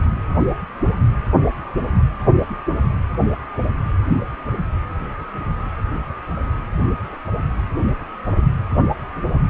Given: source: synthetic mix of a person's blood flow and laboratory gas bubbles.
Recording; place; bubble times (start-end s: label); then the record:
Doppler ultrasound of blood flow; precordium
no bubbles
From the record:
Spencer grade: 0 (complete lack of bubble signals)